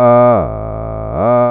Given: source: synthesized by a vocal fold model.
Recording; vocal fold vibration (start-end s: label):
sustained vowel that changes in the middle
0.00-0.30 s: 121.3 Hz, open quotient 0.40
0.50-1.10 s: 54.6 Hz, open quotient 0.42
1.30-1.51 s: 121.3 Hz, open quotient 0.40